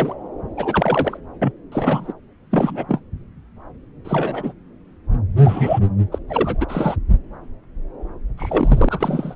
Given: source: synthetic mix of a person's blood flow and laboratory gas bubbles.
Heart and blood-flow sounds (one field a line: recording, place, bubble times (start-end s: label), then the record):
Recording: Doppler ultrasound of blood flow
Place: subclavian vein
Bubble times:
0.00-0.14 s: bubbles
0.56-1.18 s: bubbles
1.42-1.52 s: bubbles
1.71-2.13 s: bubbles
2.50-2.85 s: bubbles
2.89-3.00 s: bubbles
4.04-4.53 s: bubbles
5.36-5.79 s: bubbles
6.11-6.18 s: bubbles
6.28-6.65 s: bubbles
6.68-6.96 s: bubbles
8.38-9.35 s: bubbles
From the record:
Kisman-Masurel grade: 232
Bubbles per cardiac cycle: several, 3 to 8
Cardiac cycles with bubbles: 50 to 99%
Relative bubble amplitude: moderate (0.250 to 0.450)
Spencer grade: 3 (all of the cardiac periods contain showers or single bubble signals, but not dominating or overriding the cardiac motion signals)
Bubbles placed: anywhere in the cardiac cycle